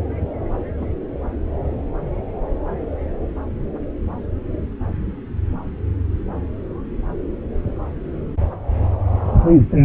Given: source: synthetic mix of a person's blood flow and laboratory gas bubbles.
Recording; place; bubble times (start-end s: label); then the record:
Doppler ultrasound of blood flow; subclavian vein
0.78-0.86 s: bubbles
From the record:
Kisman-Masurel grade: 111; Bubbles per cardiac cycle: 1 to 2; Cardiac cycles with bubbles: 1 to 10%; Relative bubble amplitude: barely perceptible (0.100 to 0.250); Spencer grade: 1 (occasional bubble signal discernible with the cardiac motion signal, with majority of cardiac periods free of bubbles); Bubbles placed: anywhere in the cardiac cycle